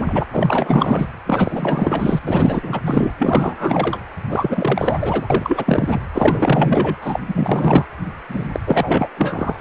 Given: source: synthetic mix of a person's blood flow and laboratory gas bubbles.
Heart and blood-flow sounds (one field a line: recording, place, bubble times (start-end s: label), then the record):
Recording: Doppler ultrasound of blood flow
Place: precordium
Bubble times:
0.00-0.23 s: bubbles
0.33-1.07 s: bubbles
1.25-2.19 s: bubbles
2.23-2.80 s: bubbles
2.84-3.12 s: bubbles
3.18-4.00 s: bubbles
4.28-6.01 s: bubbles
6.13-6.96 s: bubbles
7.01-7.20 s: bubbles
7.28-7.85 s: bubbles
8.28-8.49 s: bubbles
8.52-8.60 s: bubbles
8.66-9.10 s: bubbles
9.17-9.61 s: bubbles
From the record:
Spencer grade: 4 (maximum detectable bubble signal sounding continuously throughout systole and diastole of every cardiac period, and overriding the amplitude of the normal cardiac signals)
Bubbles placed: anywhere in the cardiac cycle